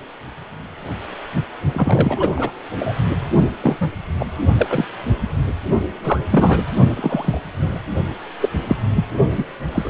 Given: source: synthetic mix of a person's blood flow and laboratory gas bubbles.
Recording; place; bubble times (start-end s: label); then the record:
Doppler ultrasound of blood flow; precordium
1.73-2.29 s: bubbles
2.36-2.51 s: bubbles
2.79-2.96 s: bubbles
3.60-3.76 s: bubbles
3.81-3.90 s: bubbles
4.19-4.26 s: bubbles
4.58-4.85 s: bubbles
6.04-6.20 s: bubbles
6.30-6.66 s: bubbles
6.96-7.41 s: bubbles
7.61-7.81 s: bubbles
8.41-8.49 s: bubbles
8.69-8.77 s: bubbles
8.96-9.04 s: bubbles
9.29-9.44 s: bubbles
9.66-9.90 s: bubbles
From the record:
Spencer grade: 3 (all of the cardiac periods contain showers or single bubble signals, but not dominating or overriding the cardiac motion signals); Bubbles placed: only in the low amplitude regions of the cardiac cycle